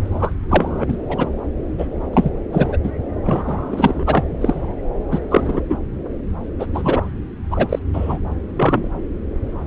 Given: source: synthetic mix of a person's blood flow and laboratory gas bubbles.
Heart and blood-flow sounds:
Doppler ultrasound of blood flow; subclavian vein
0.05-0.33 s: bubbles
0.49-0.85 s: bubbles
0.88-0.96 s: bubbles
1.09-1.30 s: bubbles
1.78-1.87 s: bubbles
2.13-2.30 s: bubbles
2.52-2.76 s: bubbles
2.83-2.90 s: bubbles
3.24-4.25 s: bubbles
4.40-4.75 s: bubbles
5.11-5.20 s: bubbles
5.31-5.60 s: bubbles
5.69-5.77 s: bubbles
6.59-6.67 s: bubbles
6.74-7.08 s: bubbles
7.50-7.79 s: bubbles
7.93-8.19 s: bubbles
8.56-8.88 s: bubbles
From the record:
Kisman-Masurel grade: 243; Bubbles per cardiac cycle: several, 3 to 8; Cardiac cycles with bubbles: 100%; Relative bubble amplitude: loud (0.450 to 0.775); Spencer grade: 3 (all of the cardiac periods contain showers or single bubble signals, but not dominating or overriding the cardiac motion signals); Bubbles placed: anywhere in the cardiac cycle

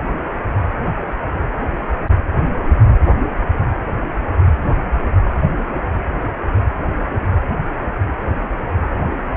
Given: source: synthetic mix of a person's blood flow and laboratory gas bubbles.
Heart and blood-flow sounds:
Doppler ultrasound of blood flow; precordium
no bubbles
From the record:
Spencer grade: 0 (complete lack of bubble signals)

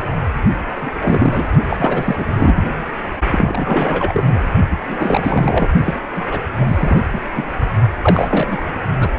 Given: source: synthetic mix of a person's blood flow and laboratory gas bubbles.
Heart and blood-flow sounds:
Doppler ultrasound of blood flow; precordium
0.00-0.02 s: bubbles
0.81-1.48 s: bubbles
1.69-2.25 s: bubbles
2.36-2.68 s: bubbles
3.30-4.41 s: bubbles
4.71-4.77 s: bubbles
4.87-5.68 s: bubbles
5.85-6.00 s: bubbles
6.15-6.27 s: bubbles
6.31-6.40 s: bubbles
6.57-7.02 s: bubbles
7.13-7.23 s: bubbles
7.36-7.45 s: bubbles
8.02-8.72 s: bubbles
9.00-9.10 s: bubbles
From the record:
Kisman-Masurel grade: 343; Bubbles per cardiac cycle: rolling drumbeat, 9 or more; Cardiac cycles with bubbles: 100%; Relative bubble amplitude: loud (0.450 to 0.775); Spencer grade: 3 (all of the cardiac periods contain showers or single bubble signals, but not dominating or overriding the cardiac motion signals); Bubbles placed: only in the low amplitude regions of the cardiac cycle

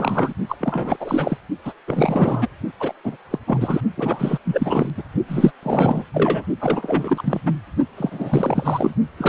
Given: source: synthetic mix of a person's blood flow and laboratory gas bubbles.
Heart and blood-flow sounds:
Doppler ultrasound of blood flow; precordium
0.00-0.33 s: bubbles
0.49-0.55 s: bubbles
0.60-0.97 s: bubbles
1.00-1.37 s: bubbles
1.65-1.73 s: bubbles
1.87-2.48 s: bubbles
2.79-2.93 s: bubbles
3.03-3.17 s: bubbles
3.30-3.38 s: bubbles
3.46-3.80 s: bubbles
3.96-4.38 s: bubbles
4.45-4.90 s: bubbles
4.97-5.03 s: bubbles
5.28-5.52 s: bubbles
5.62-6.04 s: bubbles
6.13-6.44 s: bubbles
6.60-7.41 s: bubbles
7.46-7.52 s: bubbles
7.96-8.94 s: bubbles
9.17-9.29 s: bubbles
From the record:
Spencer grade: 3 (all of the cardiac periods contain showers or single bubble signals, but not dominating or overriding the cardiac motion signals); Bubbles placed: only in the low amplitude regions of the cardiac cycle

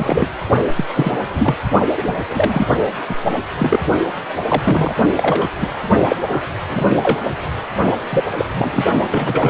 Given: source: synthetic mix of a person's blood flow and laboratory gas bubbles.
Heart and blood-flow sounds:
Doppler ultrasound of blood flow; precordium
0.00-0.27 s: bubbles
0.76-0.84 s: bubbles
0.94-1.12 s: bubbles
1.33-1.55 s: bubbles
1.97-2.16 s: bubbles
2.29-2.67 s: bubbles
3.09-3.15 s: bubbles
3.59-3.79 s: bubbles
4.48-4.62 s: bubbles
4.65-4.94 s: bubbles
5.17-5.47 s: bubbles
5.61-5.68 s: bubbles
6.09-6.16 s: bubbles
6.29-6.43 s: bubbles
6.69-6.90 s: bubbles
6.96-7.21 s: bubbles
8.09-8.23 s: bubbles
8.38-8.45 s: bubbles
8.58-8.84 s: bubbles
9.11-9.49 s: bubbles
From the record:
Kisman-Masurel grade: 243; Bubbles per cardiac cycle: several, 3 to 8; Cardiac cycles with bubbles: 100%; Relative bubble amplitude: loud (0.450 to 0.775); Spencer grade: 3 (all of the cardiac periods contain showers or single bubble signals, but not dominating or overriding the cardiac motion signals); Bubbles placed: only in the low amplitude regions of the cardiac cycle

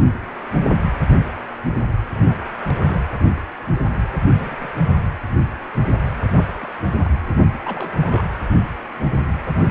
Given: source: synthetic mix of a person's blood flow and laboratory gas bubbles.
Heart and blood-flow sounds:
Doppler ultrasound of blood flow; precordium
2.11-2.48 s: bubbles
2.61-3.03 s: bubbles
4.27-4.55 s: bubbles
4.59-4.71 s: bubbles
6.33-6.47 s: bubbles
6.61-6.66 s: bubbles
7.04-7.10 s: bubbles
7.64-7.89 s: bubbles
7.96-8.24 s: bubbles
From the record:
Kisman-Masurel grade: 221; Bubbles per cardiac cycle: several, 3 to 8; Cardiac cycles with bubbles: 10 to 50%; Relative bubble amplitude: barely perceptible (0.100 to 0.250); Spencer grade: 2 (many but less than half of the cardiac periods contain bubble signals, singularly or in groups); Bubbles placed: anywhere in the cardiac cycle

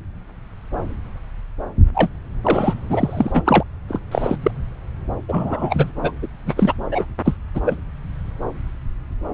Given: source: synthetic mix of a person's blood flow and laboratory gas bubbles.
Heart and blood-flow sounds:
Doppler ultrasound of blood flow; subclavian vein
1.94-2.09 s: bubbles
2.43-2.74 s: bubbles
2.90-3.63 s: bubbles
3.88-4.00 s: bubbles
4.11-4.37 s: bubbles
4.42-4.51 s: bubbles
5.28-5.92 s: bubbles
6.02-6.12 s: bubbles
6.22-6.27 s: bubbles
6.46-6.54 s: bubbles
6.56-6.74 s: bubbles
6.91-7.05 s: bubbles
7.25-7.36 s: bubbles
7.54-7.60 s: bubbles
7.66-7.75 s: bubbles
From the record:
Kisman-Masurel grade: 233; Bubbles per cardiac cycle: several, 3 to 8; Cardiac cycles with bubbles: 50 to 99%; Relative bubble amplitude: loud (0.450 to 0.775); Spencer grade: 3 (all of the cardiac periods contain showers or single bubble signals, but not dominating or overriding the cardiac motion signals); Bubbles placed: anywhere in the cardiac cycle

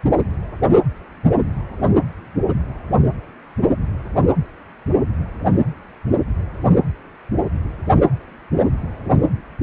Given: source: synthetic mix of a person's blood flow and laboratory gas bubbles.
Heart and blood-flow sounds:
Doppler ultrasound of blood flow; precordium
no bubbles
From the record:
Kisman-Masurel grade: 000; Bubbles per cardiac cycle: 0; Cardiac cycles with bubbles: 0%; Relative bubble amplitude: no bubbles discernible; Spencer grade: 0 (complete lack of bubble signals)

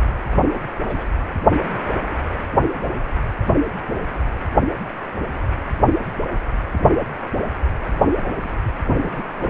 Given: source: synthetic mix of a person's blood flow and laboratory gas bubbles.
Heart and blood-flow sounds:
Doppler ultrasound of blood flow; precordium
0.42-0.64 s: bubbles
0.84-1.06 s: bubbles
7.99-8.06 s: bubbles
8.40-8.52 s: bubbles
9.03-9.50 s: bubbles
From the record:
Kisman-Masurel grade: 221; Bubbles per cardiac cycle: several, 3 to 8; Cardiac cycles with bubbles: 10 to 50%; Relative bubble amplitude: barely perceptible (0.100 to 0.250); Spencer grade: 2 (many but less than half of the cardiac periods contain bubble signals, singularly or in groups); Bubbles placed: anywhere in the cardiac cycle

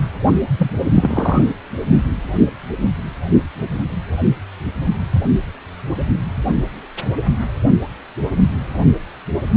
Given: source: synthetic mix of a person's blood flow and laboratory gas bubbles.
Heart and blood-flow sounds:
Doppler ultrasound of blood flow; precordium
0.58-0.71 s: bubbles
0.94-1.42 s: bubbles
From the record:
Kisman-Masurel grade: 113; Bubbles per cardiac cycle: 1 to 2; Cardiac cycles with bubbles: 1 to 10%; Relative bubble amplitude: loud (0.450 to 0.775); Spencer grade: 1 (occasional bubble signal discernible with the cardiac motion signal, with majority of cardiac periods free of bubbles); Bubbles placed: only in the low amplitude regions of the cardiac cycle

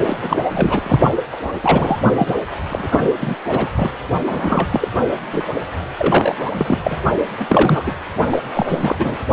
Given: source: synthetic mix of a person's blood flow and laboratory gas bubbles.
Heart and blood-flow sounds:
Doppler ultrasound of blood flow; precordium
0.00-0.49 s: bubbles
0.51-1.00 s: bubbles
1.32-1.37 s: bubbles
1.43-1.52 s: bubbles
1.62-1.97 s: bubbles
2.17-2.35 s: bubbles
2.69-3.35 s: bubbles
3.48-3.71 s: bubbles
3.76-3.91 s: bubbles
4.24-4.88 s: bubbles
5.31-5.47 s: bubbles
5.99-6.35 s: bubbles
6.41-6.51 s: bubbles
6.54-6.97 s: bubbles
7.28-7.93 s: bubbles
8.29-8.39 s: bubbles
8.54-8.96 s: bubbles
8.99-9.18 s: bubbles
From the record:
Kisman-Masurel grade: 343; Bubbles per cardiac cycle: rolling drumbeat, 9 or more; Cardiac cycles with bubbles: 100%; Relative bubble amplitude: loud (0.450 to 0.775); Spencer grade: 3 (all of the cardiac periods contain showers or single bubble signals, but not dominating or overriding the cardiac motion signals); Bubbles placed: only in the low amplitude regions of the cardiac cycle

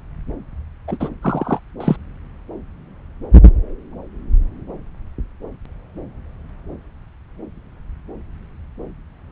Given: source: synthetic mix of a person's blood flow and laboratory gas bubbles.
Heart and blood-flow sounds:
Doppler ultrasound of blood flow; subclavian vein
0.88-0.98 s: bubbles
1.00-1.09 s: bubbles
1.23-1.59 s: bubbles
1.80-1.96 s: bubbles
From the record:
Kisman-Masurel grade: 213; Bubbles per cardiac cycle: several, 3 to 8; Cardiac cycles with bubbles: 1 to 10%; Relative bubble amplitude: loud (0.450 to 0.775); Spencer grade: 1 (occasional bubble signal discernible with the cardiac motion signal, with majority of cardiac periods free of bubbles); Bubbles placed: anywhere in the cardiac cycle

